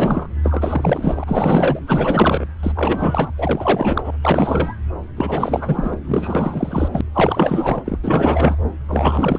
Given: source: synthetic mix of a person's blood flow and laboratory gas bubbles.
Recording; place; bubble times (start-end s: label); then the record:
Doppler ultrasound of blood flow; subclavian vein
0.00-0.28 s: bubbles
0.43-1.79 s: bubbles
1.87-2.46 s: bubbles
2.62-2.72 s: bubbles
2.75-3.31 s: bubbles
3.38-4.11 s: bubbles
4.23-4.75 s: bubbles
5.17-5.97 s: bubbles
6.04-7.01 s: bubbles
7.14-7.98 s: bubbles
8.03-8.57 s: bubbles
8.88-9.39 s: bubbles
From the record:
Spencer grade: 4 (maximum detectable bubble signal sounding continuously throughout systole and diastole of every cardiac period, and overriding the amplitude of the normal cardiac signals); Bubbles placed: anywhere in the cardiac cycle